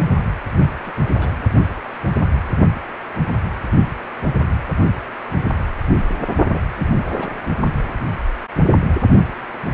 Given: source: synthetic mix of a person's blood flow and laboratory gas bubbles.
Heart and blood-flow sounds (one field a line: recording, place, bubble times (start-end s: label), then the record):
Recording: Doppler ultrasound of blood flow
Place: precordium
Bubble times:
0.60-0.70 s: bubbles
0.79-0.92 s: bubbles
1.19-1.37 s: bubbles
6.52-6.60 s: bubbles
6.79-7.31 s: bubbles
From the record:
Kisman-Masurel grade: 221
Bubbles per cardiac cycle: several, 3 to 8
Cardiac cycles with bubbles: 10 to 50%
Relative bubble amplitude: barely perceptible (0.100 to 0.250)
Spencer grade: 2 (many but less than half of the cardiac periods contain bubble signals, singularly or in groups)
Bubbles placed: only in the low amplitude regions of the cardiac cycle